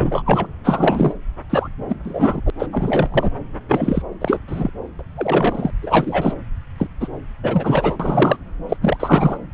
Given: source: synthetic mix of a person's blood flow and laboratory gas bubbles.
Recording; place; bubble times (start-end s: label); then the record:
Doppler ultrasound of blood flow; subclavian vein
0.00-0.22 s: bubbles
0.25-0.46 s: bubbles
0.64-1.14 s: bubbles
1.50-1.69 s: bubbles
1.88-1.96 s: bubbles
2.04-2.40 s: bubbles
2.46-2.50 s: bubbles
2.59-2.67 s: bubbles
2.73-3.29 s: bubbles
3.68-4.02 s: bubbles
4.21-4.40 s: bubbles
4.47-4.70 s: bubbles
4.99-5.03 s: bubbles
5.15-5.70 s: bubbles
5.81-6.34 s: bubbles
6.77-6.87 s: bubbles
7.00-7.08 s: bubbles
7.42-7.96 s: bubbles
7.99-8.37 s: bubbles
8.68-8.76 s: bubbles
8.81-8.97 s: bubbles
8.99-9.38 s: bubbles
From the record:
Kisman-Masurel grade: 343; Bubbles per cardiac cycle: rolling drumbeat, 9 or more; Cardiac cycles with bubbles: 100%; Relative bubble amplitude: loud (0.450 to 0.775); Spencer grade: 3 (all of the cardiac periods contain showers or single bubble signals, but not dominating or overriding the cardiac motion signals); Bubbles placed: anywhere in the cardiac cycle